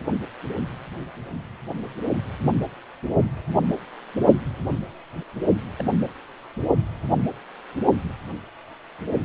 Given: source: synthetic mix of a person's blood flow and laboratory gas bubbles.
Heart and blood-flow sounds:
Doppler ultrasound of blood flow; precordium
4.65-4.79 s: bubbles
5.79-5.84 s: bubbles
From the record:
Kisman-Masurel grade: 111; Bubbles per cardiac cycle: 1 to 2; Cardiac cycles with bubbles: 1 to 10%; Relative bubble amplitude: barely perceptible (0.100 to 0.250); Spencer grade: 1 (occasional bubble signal discernible with the cardiac motion signal, with majority of cardiac periods free of bubbles); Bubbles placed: anywhere in the cardiac cycle

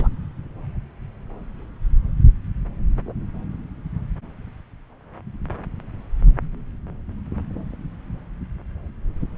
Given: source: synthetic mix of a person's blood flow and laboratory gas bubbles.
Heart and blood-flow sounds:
Doppler ultrasound of blood flow; subclavian vein
0.00-0.08 s: bubbles
From the record:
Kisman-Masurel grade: 211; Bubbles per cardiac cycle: several, 3 to 8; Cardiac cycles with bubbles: 1 to 10%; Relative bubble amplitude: barely perceptible (0.100 to 0.250); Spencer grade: 1 (occasional bubble signal discernible with the cardiac motion signal, with majority of cardiac periods free of bubbles); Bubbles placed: anywhere in the cardiac cycle

